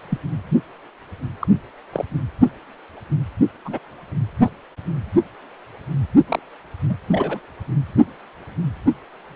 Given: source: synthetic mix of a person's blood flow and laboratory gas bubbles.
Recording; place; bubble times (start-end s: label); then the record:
Doppler ultrasound of blood flow; precordium
0.10-0.18 s: bubbles
1.41-1.47 s: bubbles
1.93-2.04 s: bubbles
3.65-3.79 s: bubbles
4.44-4.50 s: bubbles
6.29-6.39 s: bubbles
6.89-6.96 s: bubbles
7.11-7.39 s: bubbles
From the record:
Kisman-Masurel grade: 122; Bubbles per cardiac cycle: 1 to 2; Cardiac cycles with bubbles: 10 to 50%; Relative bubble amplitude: moderate (0.250 to 0.450); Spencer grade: 2 (many but less than half of the cardiac periods contain bubble signals, singularly or in groups); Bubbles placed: anywhere in the cardiac cycle